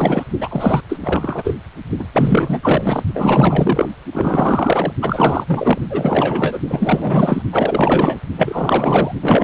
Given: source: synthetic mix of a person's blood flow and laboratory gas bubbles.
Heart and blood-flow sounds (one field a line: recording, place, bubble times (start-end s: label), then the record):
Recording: Doppler ultrasound of blood flow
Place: precordium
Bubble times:
0.00-0.24 s: bubbles
0.40-0.81 s: bubbles
0.89-1.54 s: bubbles
1.99-2.07 s: bubbles
2.13-2.59 s: bubbles
2.62-3.03 s: bubbles
3.14-3.89 s: bubbles
4.11-4.92 s: bubbles
5.01-5.79 s: bubbles
5.89-6.59 s: bubbles
6.67-7.42 s: bubbles
7.52-8.21 s: bubbles
8.37-9.12 s: bubbles
9.21-9.44 s: bubbles
From the record:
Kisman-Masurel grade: 444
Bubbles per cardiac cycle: continuous sound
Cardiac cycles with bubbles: 100%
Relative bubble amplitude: maximal (0.775 to 0.999)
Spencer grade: 4 (maximum detectable bubble signal sounding continuously throughout systole and diastole of every cardiac period, and overriding the amplitude of the normal cardiac signals)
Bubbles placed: only in the low amplitude regions of the cardiac cycle